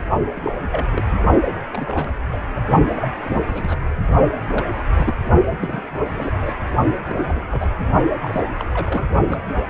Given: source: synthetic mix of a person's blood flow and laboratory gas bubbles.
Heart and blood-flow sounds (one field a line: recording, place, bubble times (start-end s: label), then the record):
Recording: Doppler ultrasound of blood flow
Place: precordium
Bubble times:
0.35-0.41 s: bubbles
0.43-0.53 s: bubbles
0.72-1.06 s: bubbles
1.72-2.10 s: bubbles
2.29-2.38 s: bubbles
2.55-2.60 s: bubbles
2.96-3.08 s: bubbles
3.23-3.77 s: bubbles
4.49-4.63 s: bubbles
4.96-5.15 s: bubbles
5.61-5.80 s: bubbles
5.95-6.55 s: bubbles
7.08-7.25 s: bubbles
7.29-7.41 s: bubbles
7.51-7.66 s: bubbles
8.22-8.42 s: bubbles
8.57-8.66 s: bubbles
8.74-9.10 s: bubbles
9.26-9.38 s: bubbles
From the record:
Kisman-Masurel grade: 242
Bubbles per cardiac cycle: several, 3 to 8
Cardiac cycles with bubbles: 100%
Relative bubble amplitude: moderate (0.250 to 0.450)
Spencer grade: 3 (all of the cardiac periods contain showers or single bubble signals, but not dominating or overriding the cardiac motion signals)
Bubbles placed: only in the low amplitude regions of the cardiac cycle